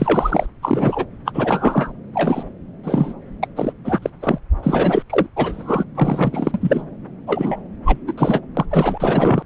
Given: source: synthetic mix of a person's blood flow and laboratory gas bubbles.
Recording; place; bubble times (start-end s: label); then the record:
Doppler ultrasound of blood flow; subclavian vein
0.00-0.46 s: bubbles
0.62-1.05 s: bubbles
1.25-1.92 s: bubbles
2.14-2.43 s: bubbles
2.83-3.14 s: bubbles
3.42-3.48 s: bubbles
3.56-3.73 s: bubbles
3.85-3.98 s: bubbles
4.02-4.10 s: bubbles
4.22-4.38 s: bubbles
4.62-5.02 s: bubbles
5.09-5.26 s: bubbles
5.36-5.85 s: bubbles
5.95-6.83 s: bubbles
7.26-7.56 s: bubbles
7.85-7.97 s: bubbles
8.06-8.13 s: bubbles
8.17-8.41 s: bubbles
8.57-8.65 s: bubbles
8.71-9.42 s: bubbles
From the record:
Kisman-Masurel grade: 233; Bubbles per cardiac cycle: several, 3 to 8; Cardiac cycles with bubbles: 50 to 99%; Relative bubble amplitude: loud (0.450 to 0.775); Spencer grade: 3 (all of the cardiac periods contain showers or single bubble signals, but not dominating or overriding the cardiac motion signals); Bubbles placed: anywhere in the cardiac cycle